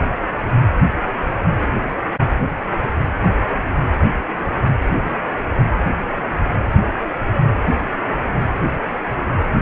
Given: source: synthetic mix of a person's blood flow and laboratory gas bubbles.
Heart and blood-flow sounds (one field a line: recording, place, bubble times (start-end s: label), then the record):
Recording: Doppler ultrasound of blood flow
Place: precordium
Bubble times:
no bubbles
From the record:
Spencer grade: 0 (complete lack of bubble signals)